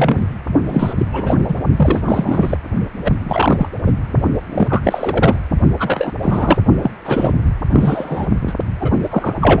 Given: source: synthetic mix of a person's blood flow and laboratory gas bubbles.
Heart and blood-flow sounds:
Doppler ultrasound of blood flow; precordium
0.00-0.26 s: bubbles
0.67-0.94 s: bubbles
0.97-1.05 s: bubbles
1.11-1.44 s: bubbles
1.47-1.54 s: bubbles
1.76-2.02 s: bubbles
2.05-2.58 s: bubbles
3.05-3.12 s: bubbles
3.25-3.69 s: bubbles
3.86-3.92 s: bubbles
4.50-5.36 s: bubbles
5.79-6.12 s: bubbles
6.23-6.58 s: bubbles
6.83-6.91 s: bubbles
7.04-7.33 s: bubbles
7.72-8.26 s: bubbles
8.46-8.54 s: bubbles
8.80-8.90 s: bubbles
9.03-9.33 s: bubbles
9.41-9.60 s: bubbles
From the record:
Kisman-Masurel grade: 343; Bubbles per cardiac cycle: rolling drumbeat, 9 or more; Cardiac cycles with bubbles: 100%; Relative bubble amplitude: loud (0.450 to 0.775); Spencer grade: 3 (all of the cardiac periods contain showers or single bubble signals, but not dominating or overriding the cardiac motion signals); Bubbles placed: only in the low amplitude regions of the cardiac cycle

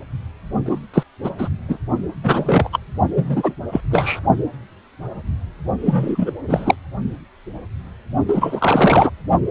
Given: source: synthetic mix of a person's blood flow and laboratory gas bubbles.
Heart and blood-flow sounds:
Doppler ultrasound of blood flow; precordium
0.66-0.80 s: bubbles
0.94-1.03 s: bubbles
1.24-1.30 s: bubbles
1.38-1.49 s: bubbles
1.68-1.79 s: bubbles
2.23-2.70 s: bubbles
2.72-2.79 s: bubbles
3.16-3.51 s: bubbles
3.71-3.80 s: bubbles
3.91-4.20 s: bubbles
5.80-6.31 s: bubbles
6.47-6.75 s: bubbles
8.28-9.11 s: bubbles
From the record:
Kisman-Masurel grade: 233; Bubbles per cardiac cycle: several, 3 to 8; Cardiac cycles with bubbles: 50 to 99%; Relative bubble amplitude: loud (0.450 to 0.775); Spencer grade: 3 (all of the cardiac periods contain showers or single bubble signals, but not dominating or overriding the cardiac motion signals); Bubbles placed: only in the low amplitude regions of the cardiac cycle

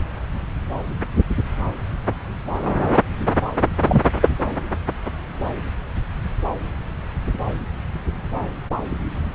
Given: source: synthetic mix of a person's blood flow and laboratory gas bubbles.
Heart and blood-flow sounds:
Doppler ultrasound of blood flow; subclavian vein
3.88-4.03 s: bubbles
4.21-4.29 s: bubbles
From the record:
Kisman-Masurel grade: 113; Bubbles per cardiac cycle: 1 to 2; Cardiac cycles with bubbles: 1 to 10%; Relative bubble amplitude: loud (0.450 to 0.775); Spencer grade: 1 (occasional bubble signal discernible with the cardiac motion signal, with majority of cardiac periods free of bubbles); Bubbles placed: anywhere in the cardiac cycle

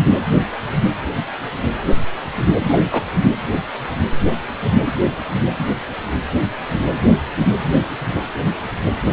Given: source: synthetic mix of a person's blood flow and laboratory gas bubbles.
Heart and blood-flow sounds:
Doppler ultrasound of blood flow; precordium
2.64-2.85 s: bubbles
2.91-3.04 s: bubbles
From the record:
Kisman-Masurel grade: 112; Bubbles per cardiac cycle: 1 to 2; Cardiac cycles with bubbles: 1 to 10%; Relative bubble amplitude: moderate (0.250 to 0.450); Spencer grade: 1 (occasional bubble signal discernible with the cardiac motion signal, with majority of cardiac periods free of bubbles); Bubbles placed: anywhere in the cardiac cycle

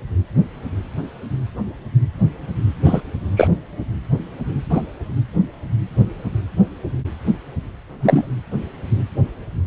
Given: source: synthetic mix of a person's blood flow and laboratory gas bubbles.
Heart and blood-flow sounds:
Doppler ultrasound of blood flow; precordium
2.84-3.01 s: bubbles
3.36-3.48 s: bubbles
4.70-4.82 s: bubbles
8.00-8.27 s: bubbles
From the record:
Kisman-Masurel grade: 123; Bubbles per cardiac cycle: 1 to 2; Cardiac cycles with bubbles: 10 to 50%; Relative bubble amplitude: loud (0.450 to 0.775); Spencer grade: 2 (many but less than half of the cardiac periods contain bubble signals, singularly or in groups); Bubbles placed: anywhere in the cardiac cycle

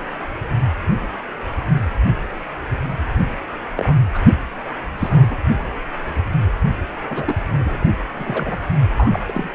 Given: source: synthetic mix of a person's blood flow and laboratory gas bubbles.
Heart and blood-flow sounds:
Doppler ultrasound of blood flow; precordium
3.77-3.93 s: bubbles
4.14-4.23 s: bubbles
4.98-5.38 s: bubbles
7.10-7.35 s: bubbles
7.58-7.85 s: bubbles
8.18-8.57 s: bubbles
8.97-9.20 s: bubbles
9.28-9.49 s: bubbles
From the record:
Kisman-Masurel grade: 232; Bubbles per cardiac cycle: several, 3 to 8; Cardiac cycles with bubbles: 50 to 99%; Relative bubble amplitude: moderate (0.250 to 0.450); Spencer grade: 3 (all of the cardiac periods contain showers or single bubble signals, but not dominating or overriding the cardiac motion signals); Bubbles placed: anywhere in the cardiac cycle

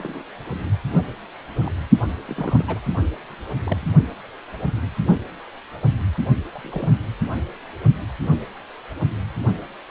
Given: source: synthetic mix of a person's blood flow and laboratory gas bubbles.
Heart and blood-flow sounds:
Doppler ultrasound of blood flow; precordium
0.00-0.24 s: bubbles
1.59-1.72 s: bubbles
2.25-2.79 s: bubbles
3.65-3.85 s: bubbles
6.55-6.94 s: bubbles
From the record:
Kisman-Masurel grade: 121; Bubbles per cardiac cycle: 1 to 2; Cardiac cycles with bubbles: 10 to 50%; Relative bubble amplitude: barely perceptible (0.100 to 0.250); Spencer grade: 2 (many but less than half of the cardiac periods contain bubble signals, singularly or in groups); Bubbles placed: only in the low amplitude regions of the cardiac cycle

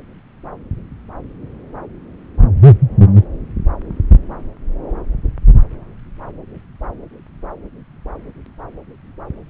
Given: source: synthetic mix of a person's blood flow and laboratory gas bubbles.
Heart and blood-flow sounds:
Doppler ultrasound of blood flow; subclavian vein
no bubbles
From the record:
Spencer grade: 0 (complete lack of bubble signals)

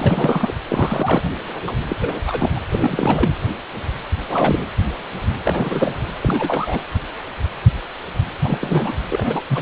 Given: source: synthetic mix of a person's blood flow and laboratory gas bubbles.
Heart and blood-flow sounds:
Doppler ultrasound of blood flow; precordium
0.00-0.54 s: bubbles
0.68-1.22 s: bubbles
1.67-1.72 s: bubbles
1.89-1.97 s: bubbles
2.01-2.21 s: bubbles
2.24-2.49 s: bubbles
2.54-2.60 s: bubbles
2.69-3.31 s: bubbles
4.28-4.68 s: bubbles
5.44-5.95 s: bubbles
6.21-6.80 s: bubbles
8.44-8.94 s: bubbles
9.10-9.41 s: bubbles
9.48-9.62 s: bubbles
From the record:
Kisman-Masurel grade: 332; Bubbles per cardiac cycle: rolling drumbeat, 9 or more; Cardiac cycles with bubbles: 50 to 99%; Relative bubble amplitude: moderate (0.250 to 0.450); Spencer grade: 3 (all of the cardiac periods contain showers or single bubble signals, but not dominating or overriding the cardiac motion signals); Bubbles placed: anywhere in the cardiac cycle

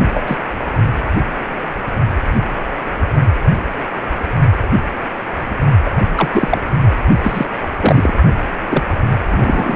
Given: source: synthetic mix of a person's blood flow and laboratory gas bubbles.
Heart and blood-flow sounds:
Doppler ultrasound of blood flow; precordium
0.14-0.38 s: bubbles
5.84-5.92 s: bubbles
6.16-6.29 s: bubbles
6.33-6.60 s: bubbles
7.23-7.46 s: bubbles
7.80-8.14 s: bubbles
8.70-8.85 s: bubbles
9.30-9.76 s: bubbles
From the record:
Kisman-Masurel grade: 223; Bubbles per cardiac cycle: several, 3 to 8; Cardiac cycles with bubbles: 10 to 50%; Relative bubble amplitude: loud (0.450 to 0.775); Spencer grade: 2 (many but less than half of the cardiac periods contain bubble signals, singularly or in groups); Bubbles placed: only in the low amplitude regions of the cardiac cycle

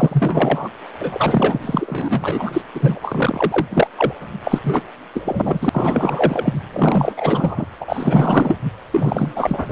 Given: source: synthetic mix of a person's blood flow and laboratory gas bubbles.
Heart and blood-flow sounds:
Doppler ultrasound of blood flow; precordium
0.00-0.69 s: bubbles
0.99-2.62 s: bubbles
2.74-2.99 s: bubbles
3.02-3.67 s: bubbles
3.70-3.88 s: bubbles
3.97-4.14 s: bubbles
4.43-4.60 s: bubbles
4.63-4.82 s: bubbles
5.13-5.69 s: bubbles
5.72-6.59 s: bubbles
6.72-7.66 s: bubbles
7.80-8.55 s: bubbles
8.90-9.72 s: bubbles
From the record:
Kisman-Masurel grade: 444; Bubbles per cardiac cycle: continuous sound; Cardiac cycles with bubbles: 100%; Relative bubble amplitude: maximal (0.775 to 0.999); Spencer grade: 4 (maximum detectable bubble signal sounding continuously throughout systole and diastole of every cardiac period, and overriding the amplitude of the normal cardiac signals); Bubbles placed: anywhere in the cardiac cycle

